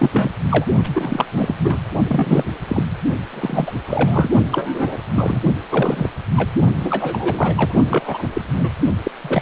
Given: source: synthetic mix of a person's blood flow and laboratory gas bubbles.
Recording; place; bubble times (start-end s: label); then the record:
Doppler ultrasound of blood flow; precordium
0.00-0.31 s: bubbles
0.51-0.66 s: bubbles
0.83-0.89 s: bubbles
0.94-1.25 s: bubbles
1.31-1.55 s: bubbles
1.64-1.80 s: bubbles
2.08-2.43 s: bubbles
2.67-2.84 s: bubbles
3.30-3.72 s: bubbles
3.86-4.29 s: bubbles
4.50-4.98 s: bubbles
5.15-5.40 s: bubbles
5.71-6.09 s: bubbles
6.36-6.50 s: bubbles
6.79-7.75 s: bubbles
7.88-8.29 s: bubbles
8.33-8.42 s: bubbles
8.56-8.70 s: bubbles
9.03-9.11 s: bubbles
9.23-9.42 s: bubbles
From the record:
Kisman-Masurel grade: 343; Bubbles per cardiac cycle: rolling drumbeat, 9 or more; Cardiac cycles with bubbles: 100%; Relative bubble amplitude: loud (0.450 to 0.775); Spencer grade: 3 (all of the cardiac periods contain showers or single bubble signals, but not dominating or overriding the cardiac motion signals); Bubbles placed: only in the low amplitude regions of the cardiac cycle